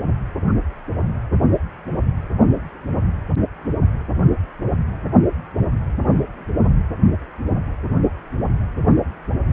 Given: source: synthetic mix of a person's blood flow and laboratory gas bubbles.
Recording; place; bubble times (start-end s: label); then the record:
Doppler ultrasound of blood flow; precordium
no bubbles
From the record:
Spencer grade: 0 (complete lack of bubble signals)